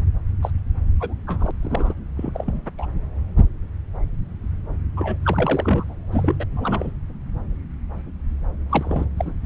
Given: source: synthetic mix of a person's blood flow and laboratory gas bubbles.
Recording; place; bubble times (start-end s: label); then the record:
Doppler ultrasound of blood flow; subclavian vein
0.42-0.51 s: bubbles
1.00-1.14 s: bubbles
1.27-1.51 s: bubbles
1.63-1.94 s: bubbles
2.17-2.31 s: bubbles
2.33-2.62 s: bubbles
2.78-2.86 s: bubbles
4.96-5.17 s: bubbles
5.23-5.95 s: bubbles
6.12-6.36 s: bubbles
6.40-6.45 s: bubbles
6.52-6.92 s: bubbles
8.70-9.04 s: bubbles
9.17-9.35 s: bubbles
9.43-9.46 s: bubbles
From the record:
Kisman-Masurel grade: 232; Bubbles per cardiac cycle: several, 3 to 8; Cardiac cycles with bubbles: 50 to 99%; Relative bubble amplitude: moderate (0.250 to 0.450); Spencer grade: 3 (all of the cardiac periods contain showers or single bubble signals, but not dominating or overriding the cardiac motion signals); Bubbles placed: anywhere in the cardiac cycle